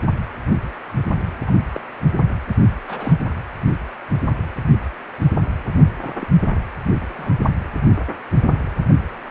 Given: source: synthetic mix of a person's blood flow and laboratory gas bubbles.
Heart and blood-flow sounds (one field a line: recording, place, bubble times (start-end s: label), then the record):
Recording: Doppler ultrasound of blood flow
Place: precordium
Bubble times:
1.47-1.54 s: bubbles
1.75-1.79 s: bubbles
2.88-3.18 s: bubbles
6.03-6.12 s: bubbles
6.19-6.27 s: bubbles
7.17-7.38 s: bubbles
From the record:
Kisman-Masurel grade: 121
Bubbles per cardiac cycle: 1 to 2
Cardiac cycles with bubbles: 10 to 50%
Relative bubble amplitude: barely perceptible (0.100 to 0.250)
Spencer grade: 2 (many but less than half of the cardiac periods contain bubble signals, singularly or in groups)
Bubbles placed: anywhere in the cardiac cycle